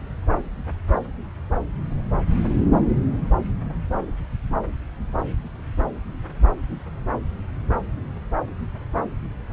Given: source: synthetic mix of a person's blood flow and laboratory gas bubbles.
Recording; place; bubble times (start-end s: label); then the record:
Doppler ultrasound of blood flow; subclavian vein
no bubbles
From the record:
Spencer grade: 0 (complete lack of bubble signals)